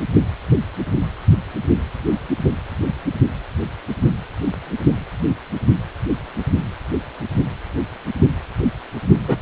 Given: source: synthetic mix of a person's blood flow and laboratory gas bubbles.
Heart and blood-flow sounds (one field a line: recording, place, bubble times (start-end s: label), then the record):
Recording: Doppler ultrasound of blood flow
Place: precordium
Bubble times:
9.28-9.37 s: bubbles
From the record:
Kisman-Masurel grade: 112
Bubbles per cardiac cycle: 1 to 2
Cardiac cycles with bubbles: 1 to 10%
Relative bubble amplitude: moderate (0.250 to 0.450)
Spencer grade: 1 (occasional bubble signal discernible with the cardiac motion signal, with majority of cardiac periods free of bubbles)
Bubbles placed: only in the low amplitude regions of the cardiac cycle